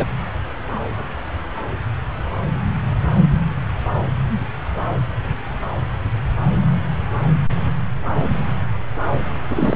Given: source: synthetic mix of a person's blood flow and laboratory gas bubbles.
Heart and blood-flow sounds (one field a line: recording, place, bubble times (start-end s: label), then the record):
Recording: Doppler ultrasound of blood flow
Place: subclavian vein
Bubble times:
0.00-0.05 s: bubbles
9.50-9.76 s: bubbles
From the record:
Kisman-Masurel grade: 222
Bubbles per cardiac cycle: several, 3 to 8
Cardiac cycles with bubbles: 10 to 50%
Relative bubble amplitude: moderate (0.250 to 0.450)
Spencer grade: 2 (many but less than half of the cardiac periods contain bubble signals, singularly or in groups)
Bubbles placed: anywhere in the cardiac cycle